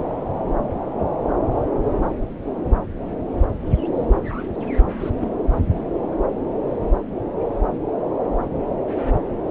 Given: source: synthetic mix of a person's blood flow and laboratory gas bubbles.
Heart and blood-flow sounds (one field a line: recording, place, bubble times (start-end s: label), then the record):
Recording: Doppler ultrasound of blood flow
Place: subclavian vein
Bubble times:
5.00-5.10 s: bubbles
5.20-5.25 s: bubbles
From the record:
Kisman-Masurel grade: 112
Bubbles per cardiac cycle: 1 to 2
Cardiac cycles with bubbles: 1 to 10%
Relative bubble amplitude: moderate (0.250 to 0.450)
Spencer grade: 1 (occasional bubble signal discernible with the cardiac motion signal, with majority of cardiac periods free of bubbles)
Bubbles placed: anywhere in the cardiac cycle